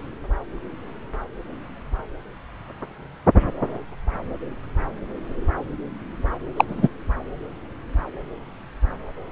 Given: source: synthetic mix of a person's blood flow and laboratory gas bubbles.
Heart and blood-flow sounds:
Doppler ultrasound of blood flow; subclavian vein
6.56-6.64 s: bubbles
6.68-6.88 s: bubbles
From the record:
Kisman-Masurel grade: 113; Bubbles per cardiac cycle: 1 to 2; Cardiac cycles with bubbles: 1 to 10%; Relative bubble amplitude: loud (0.450 to 0.775); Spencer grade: 1 (occasional bubble signal discernible with the cardiac motion signal, with majority of cardiac periods free of bubbles); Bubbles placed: anywhere in the cardiac cycle

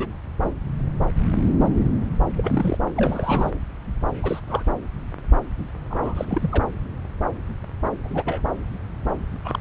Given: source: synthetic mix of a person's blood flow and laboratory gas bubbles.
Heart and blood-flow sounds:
Doppler ultrasound of blood flow; subclavian vein
0.00-0.07 s: bubbles
0.41-0.51 s: bubbles
2.37-2.78 s: bubbles
2.97-3.51 s: bubbles
4.23-4.40 s: bubbles
4.48-4.62 s: bubbles
5.90-6.63 s: bubbles
8.04-8.42 s: bubbles
9.45-9.59 s: bubbles
From the record:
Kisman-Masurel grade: 221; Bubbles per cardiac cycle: several, 3 to 8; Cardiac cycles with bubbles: 10 to 50%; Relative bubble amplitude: barely perceptible (0.100 to 0.250); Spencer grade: 2 (many but less than half of the cardiac periods contain bubble signals, singularly or in groups); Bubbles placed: anywhere in the cardiac cycle

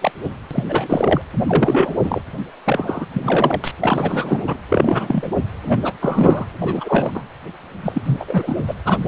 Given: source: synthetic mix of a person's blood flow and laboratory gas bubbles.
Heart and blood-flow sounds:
Doppler ultrasound of blood flow; precordium
0.00-0.11 s: bubbles
0.24-0.28 s: bubbles
0.51-0.65 s: bubbles
0.69-1.22 s: bubbles
1.47-1.94 s: bubbles
2.04-2.21 s: bubbles
2.65-3.06 s: bubbles
3.13-3.61 s: bubbles
3.64-3.71 s: bubbles
3.81-4.58 s: bubbles
4.69-5.36 s: bubbles
5.66-5.93 s: bubbles
6.00-6.46 s: bubbles
6.61-7.12 s: bubbles
7.15-7.24 s: bubbles
7.83-8.25 s: bubbles
8.28-8.55 s: bubbles
8.67-8.75 s: bubbles
8.85-8.98 s: bubbles
From the record:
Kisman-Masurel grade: 343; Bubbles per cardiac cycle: rolling drumbeat, 9 or more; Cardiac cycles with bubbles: 100%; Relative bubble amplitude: loud (0.450 to 0.775); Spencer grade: 3 (all of the cardiac periods contain showers or single bubble signals, but not dominating or overriding the cardiac motion signals); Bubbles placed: anywhere in the cardiac cycle

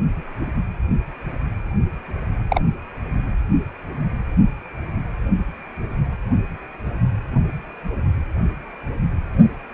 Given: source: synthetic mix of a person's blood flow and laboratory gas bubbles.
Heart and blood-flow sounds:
Doppler ultrasound of blood flow; precordium
2.49-2.61 s: bubbles
From the record:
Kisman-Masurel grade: 112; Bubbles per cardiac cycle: 1 to 2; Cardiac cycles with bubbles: 1 to 10%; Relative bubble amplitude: moderate (0.250 to 0.450); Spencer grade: 1 (occasional bubble signal discernible with the cardiac motion signal, with majority of cardiac periods free of bubbles); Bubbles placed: only in the low amplitude regions of the cardiac cycle

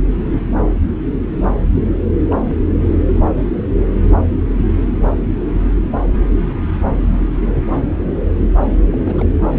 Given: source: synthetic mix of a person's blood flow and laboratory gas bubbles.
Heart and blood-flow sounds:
Doppler ultrasound of blood flow; subclavian vein
2.30-2.44 s: bubbles
2.49-2.54 s: bubbles
8.92-9.26 s: bubbles
From the record:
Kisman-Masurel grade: 211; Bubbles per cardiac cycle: several, 3 to 8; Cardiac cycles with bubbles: 1 to 10%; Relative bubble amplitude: barely perceptible (0.100 to 0.250); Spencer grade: 1 (occasional bubble signal discernible with the cardiac motion signal, with majority of cardiac periods free of bubbles); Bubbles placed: anywhere in the cardiac cycle

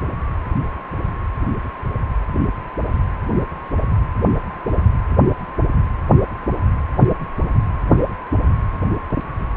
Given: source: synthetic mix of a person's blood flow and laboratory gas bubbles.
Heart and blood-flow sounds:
Doppler ultrasound of blood flow; precordium
2.89-2.99 s: bubbles
From the record:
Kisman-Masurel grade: 111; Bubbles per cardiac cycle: 1 to 2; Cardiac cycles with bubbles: 1 to 10%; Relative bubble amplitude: barely perceptible (0.100 to 0.250); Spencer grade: 1 (occasional bubble signal discernible with the cardiac motion signal, with majority of cardiac periods free of bubbles); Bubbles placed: anywhere in the cardiac cycle

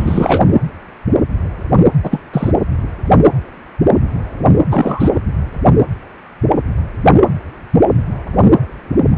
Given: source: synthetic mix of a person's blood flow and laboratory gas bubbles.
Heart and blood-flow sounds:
Doppler ultrasound of blood flow; precordium
0.00-0.44 s: bubbles
2.03-2.19 s: bubbles
2.32-2.52 s: bubbles
4.70-5.19 s: bubbles
From the record:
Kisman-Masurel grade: 223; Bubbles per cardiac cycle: several, 3 to 8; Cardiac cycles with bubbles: 10 to 50%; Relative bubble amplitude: loud (0.450 to 0.775); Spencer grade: 2 (many but less than half of the cardiac periods contain bubble signals, singularly or in groups); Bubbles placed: anywhere in the cardiac cycle

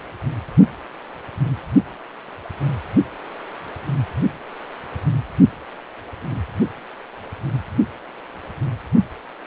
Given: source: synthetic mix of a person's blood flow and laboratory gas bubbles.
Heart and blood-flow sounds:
Doppler ultrasound of blood flow; precordium
no bubbles
From the record:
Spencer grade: 0 (complete lack of bubble signals)

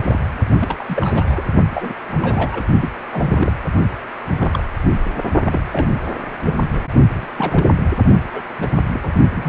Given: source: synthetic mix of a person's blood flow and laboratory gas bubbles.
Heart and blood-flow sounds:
Doppler ultrasound of blood flow; precordium
0.03-0.23 s: bubbles
0.60-0.84 s: bubbles
0.88-1.45 s: bubbles
1.74-1.94 s: bubbles
2.08-2.64 s: bubbles
2.81-2.91 s: bubbles
3.04-3.54 s: bubbles
4.31-4.63 s: bubbles
5.46-5.88 s: bubbles
6.44-6.58 s: bubbles
6.71-6.82 s: bubbles
7.09-7.26 s: bubbles
7.36-7.67 s: bubbles
8.33-8.47 s: bubbles
8.60-8.68 s: bubbles
8.93-9.12 s: bubbles
9.35-9.49 s: bubbles
From the record:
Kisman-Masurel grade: 242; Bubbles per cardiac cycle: several, 3 to 8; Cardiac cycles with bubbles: 100%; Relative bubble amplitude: moderate (0.250 to 0.450); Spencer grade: 3 (all of the cardiac periods contain showers or single bubble signals, but not dominating or overriding the cardiac motion signals); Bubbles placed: only in the low amplitude regions of the cardiac cycle

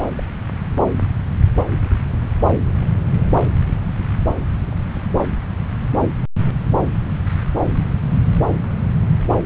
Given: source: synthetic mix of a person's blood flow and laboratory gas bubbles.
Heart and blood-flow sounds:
Doppler ultrasound of blood flow; subclavian vein
0.18-0.20 s: bubbles
From the record:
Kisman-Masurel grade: 111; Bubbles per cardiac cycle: 1 to 2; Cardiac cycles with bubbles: 1 to 10%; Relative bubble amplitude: barely perceptible (0.100 to 0.250); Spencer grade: 1 (occasional bubble signal discernible with the cardiac motion signal, with majority of cardiac periods free of bubbles); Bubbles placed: anywhere in the cardiac cycle

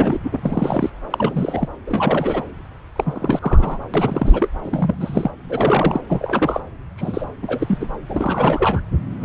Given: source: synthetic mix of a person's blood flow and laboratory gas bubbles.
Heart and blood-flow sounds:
Doppler ultrasound of blood flow; subclavian vein
0.00-0.18 s: bubbles
0.24-0.90 s: bubbles
1.10-1.68 s: bubbles
1.86-2.42 s: bubbles
2.95-3.79 s: bubbles
3.93-4.49 s: bubbles
4.62-5.30 s: bubbles
5.49-6.00 s: bubbles
6.08-6.62 s: bubbles
6.97-7.26 s: bubbles
7.42-7.87 s: bubbles
8.09-8.81 s: bubbles
9.21-9.25 s: bubbles
From the record:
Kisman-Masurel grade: 343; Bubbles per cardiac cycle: rolling drumbeat, 9 or more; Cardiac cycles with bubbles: 100%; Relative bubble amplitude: loud (0.450 to 0.775); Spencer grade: 3 (all of the cardiac periods contain showers or single bubble signals, but not dominating or overriding the cardiac motion signals); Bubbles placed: anywhere in the cardiac cycle

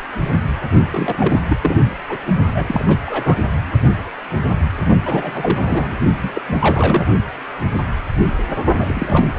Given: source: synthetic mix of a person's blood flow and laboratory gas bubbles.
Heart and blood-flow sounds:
Doppler ultrasound of blood flow; precordium
0.91-1.40 s: bubbles
1.49-1.57 s: bubbles
1.63-1.75 s: bubbles
2.09-2.17 s: bubbles
2.54-2.85 s: bubbles
2.88-2.97 s: bubbles
3.06-3.38 s: bubbles
5.05-5.96 s: bubbles
6.21-6.42 s: bubbles
6.49-6.56 s: bubbles
6.59-7.07 s: bubbles
8.80-9.29 s: bubbles
From the record:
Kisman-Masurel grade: 332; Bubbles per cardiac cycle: rolling drumbeat, 9 or more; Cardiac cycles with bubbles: 50 to 99%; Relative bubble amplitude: moderate (0.250 to 0.450); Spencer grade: 3 (all of the cardiac periods contain showers or single bubble signals, but not dominating or overriding the cardiac motion signals); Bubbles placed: only in the low amplitude regions of the cardiac cycle

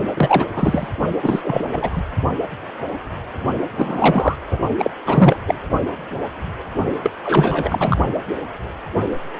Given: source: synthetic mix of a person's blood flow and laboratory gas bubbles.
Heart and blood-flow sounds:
Doppler ultrasound of blood flow; precordium
0.14-0.45 s: bubbles
0.52-0.88 s: bubbles
1.22-1.69 s: bubbles
1.72-2.03 s: bubbles
3.77-4.35 s: bubbles
4.47-4.57 s: bubbles
4.78-4.91 s: bubbles
5.04-5.37 s: bubbles
5.46-5.55 s: bubbles
7.03-7.11 s: bubbles
7.24-7.97 s: bubbles
From the record:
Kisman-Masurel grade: 333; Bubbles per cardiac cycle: rolling drumbeat, 9 or more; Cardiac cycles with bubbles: 50 to 99%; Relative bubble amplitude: loud (0.450 to 0.775); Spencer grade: 3 (all of the cardiac periods contain showers or single bubble signals, but not dominating or overriding the cardiac motion signals); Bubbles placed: only in the low amplitude regions of the cardiac cycle

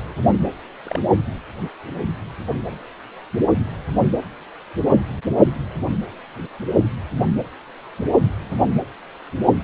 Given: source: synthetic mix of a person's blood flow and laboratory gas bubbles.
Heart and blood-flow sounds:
Doppler ultrasound of blood flow; precordium
0.85-0.99 s: bubbles
From the record:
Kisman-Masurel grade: 111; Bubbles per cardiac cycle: 1 to 2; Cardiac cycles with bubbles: 1 to 10%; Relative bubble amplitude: barely perceptible (0.100 to 0.250); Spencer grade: 1 (occasional bubble signal discernible with the cardiac motion signal, with majority of cardiac periods free of bubbles); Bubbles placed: anywhere in the cardiac cycle

